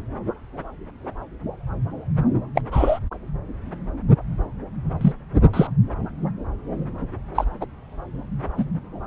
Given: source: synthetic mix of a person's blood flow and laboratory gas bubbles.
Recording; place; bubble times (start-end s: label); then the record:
Doppler ultrasound of blood flow; subclavian vein
2.54-2.61 s: bubbles
2.71-2.99 s: bubbles
5.01-5.12 s: bubbles
5.53-5.67 s: bubbles
7.35-7.45 s: bubbles
7.60-7.66 s: bubbles
8.57-8.64 s: bubbles
From the record:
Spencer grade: 2 (many but less than half of the cardiac periods contain bubble signals, singularly or in groups); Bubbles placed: anywhere in the cardiac cycle